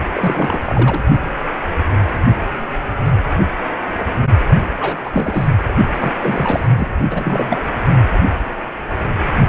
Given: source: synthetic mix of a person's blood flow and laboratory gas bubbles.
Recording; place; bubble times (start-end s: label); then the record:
Doppler ultrasound of blood flow; precordium
0.13-0.62 s: bubbles
0.65-1.02 s: bubbles
4.79-4.99 s: bubbles
5.04-5.49 s: bubbles
5.94-6.12 s: bubbles
6.21-6.68 s: bubbles
6.76-6.89 s: bubbles
7.10-7.60 s: bubbles
From the record:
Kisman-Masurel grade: 332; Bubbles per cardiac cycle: rolling drumbeat, 9 or more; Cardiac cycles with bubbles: 50 to 99%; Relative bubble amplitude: moderate (0.250 to 0.450); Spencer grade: 3 (all of the cardiac periods contain showers or single bubble signals, but not dominating or overriding the cardiac motion signals); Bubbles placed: only in the low amplitude regions of the cardiac cycle